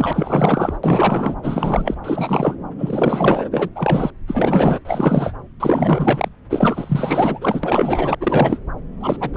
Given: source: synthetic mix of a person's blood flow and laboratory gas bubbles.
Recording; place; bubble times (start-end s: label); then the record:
Doppler ultrasound of blood flow; subclavian vein
0.00-0.77 s: bubbles
0.83-1.35 s: bubbles
1.43-1.95 s: bubbles
2.04-2.55 s: bubbles
2.78-3.70 s: bubbles
3.75-4.10 s: bubbles
4.27-4.79 s: bubbles
4.85-5.33 s: bubbles
5.60-6.29 s: bubbles
6.50-8.15 s: bubbles
8.20-8.60 s: bubbles
9.00-9.16 s: bubbles
9.20-9.37 s: bubbles
From the record:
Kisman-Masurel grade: 444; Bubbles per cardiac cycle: continuous sound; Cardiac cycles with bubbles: 100%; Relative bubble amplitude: maximal (0.775 to 0.999); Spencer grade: 4 (maximum detectable bubble signal sounding continuously throughout systole and diastole of every cardiac period, and overriding the amplitude of the normal cardiac signals); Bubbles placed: anywhere in the cardiac cycle